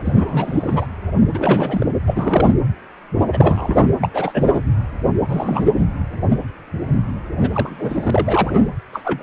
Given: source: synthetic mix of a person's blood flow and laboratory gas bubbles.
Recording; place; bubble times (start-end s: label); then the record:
Doppler ultrasound of blood flow; precordium
0.04-0.87 s: bubbles
1.34-1.87 s: bubbles
2.06-2.52 s: bubbles
3.33-3.89 s: bubbles
4.01-4.09 s: bubbles
4.13-4.63 s: bubbles
5.28-5.72 s: bubbles
7.36-8.64 s: bubbles
8.93-9.23 s: bubbles
From the record:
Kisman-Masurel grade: 332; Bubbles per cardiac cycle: rolling drumbeat, 9 or more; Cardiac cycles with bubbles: 50 to 99%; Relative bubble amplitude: moderate (0.250 to 0.450); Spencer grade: 3 (all of the cardiac periods contain showers or single bubble signals, but not dominating or overriding the cardiac motion signals); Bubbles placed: anywhere in the cardiac cycle